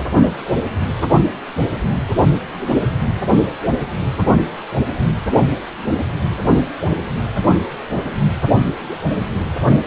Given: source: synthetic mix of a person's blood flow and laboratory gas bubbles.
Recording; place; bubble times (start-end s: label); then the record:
Doppler ultrasound of blood flow; precordium
no bubbles
From the record:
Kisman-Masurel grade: 000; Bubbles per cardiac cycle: 0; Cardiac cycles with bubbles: 0%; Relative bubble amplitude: no bubbles discernible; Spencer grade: 0 (complete lack of bubble signals)